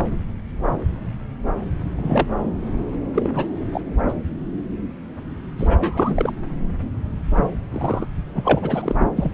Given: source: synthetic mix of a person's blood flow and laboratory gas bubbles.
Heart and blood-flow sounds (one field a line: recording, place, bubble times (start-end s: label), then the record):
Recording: Doppler ultrasound of blood flow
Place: subclavian vein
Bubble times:
0.00-0.06 s: bubbles
1.97-2.27 s: bubbles
3.14-3.46 s: bubbles
3.59-3.67 s: bubbles
3.73-3.81 s: bubbles
4.08-4.13 s: bubbles
5.58-6.31 s: bubbles
7.71-8.05 s: bubbles
8.34-8.96 s: bubbles
9.16-9.34 s: bubbles
From the record:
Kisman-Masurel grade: 232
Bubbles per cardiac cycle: several, 3 to 8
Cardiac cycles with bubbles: 50 to 99%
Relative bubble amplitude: moderate (0.250 to 0.450)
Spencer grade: 3 (all of the cardiac periods contain showers or single bubble signals, but not dominating or overriding the cardiac motion signals)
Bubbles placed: anywhere in the cardiac cycle